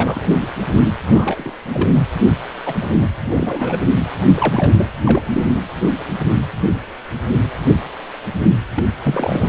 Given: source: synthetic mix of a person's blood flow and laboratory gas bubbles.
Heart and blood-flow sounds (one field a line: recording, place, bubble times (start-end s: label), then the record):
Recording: Doppler ultrasound of blood flow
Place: precordium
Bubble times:
0.00-0.31 s: bubbles
0.42-0.47 s: bubbles
1.07-1.52 s: bubbles
1.63-2.02 s: bubbles
2.66-2.75 s: bubbles
2.81-2.96 s: bubbles
3.01-3.10 s: bubbles
3.29-3.78 s: bubbles
4.35-4.86 s: bubbles
5.05-5.22 s: bubbles
5.32-5.46 s: bubbles
8.76-8.85 s: bubbles
9.02-9.47 s: bubbles
From the record:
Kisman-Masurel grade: 232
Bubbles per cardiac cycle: several, 3 to 8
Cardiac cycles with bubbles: 50 to 99%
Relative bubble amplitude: moderate (0.250 to 0.450)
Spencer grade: 3 (all of the cardiac periods contain showers or single bubble signals, but not dominating or overriding the cardiac motion signals)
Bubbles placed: anywhere in the cardiac cycle